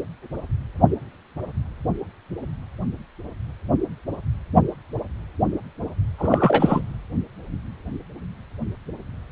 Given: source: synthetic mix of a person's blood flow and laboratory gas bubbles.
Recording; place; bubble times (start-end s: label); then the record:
Doppler ultrasound of blood flow; precordium
6.18-6.82 s: bubbles
From the record:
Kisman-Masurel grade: 223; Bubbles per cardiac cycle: several, 3 to 8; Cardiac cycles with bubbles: 10 to 50%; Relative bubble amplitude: loud (0.450 to 0.775); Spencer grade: 2 (many but less than half of the cardiac periods contain bubble signals, singularly or in groups); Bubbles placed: anywhere in the cardiac cycle